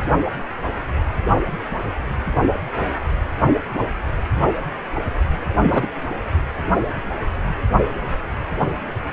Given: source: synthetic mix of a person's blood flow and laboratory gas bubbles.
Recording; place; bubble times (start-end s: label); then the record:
Doppler ultrasound of blood flow; precordium
5.63-5.87 s: bubbles
From the record:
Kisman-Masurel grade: 113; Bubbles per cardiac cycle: 1 to 2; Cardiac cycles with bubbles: 1 to 10%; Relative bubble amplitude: loud (0.450 to 0.775); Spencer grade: 1 (occasional bubble signal discernible with the cardiac motion signal, with majority of cardiac periods free of bubbles); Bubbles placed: anywhere in the cardiac cycle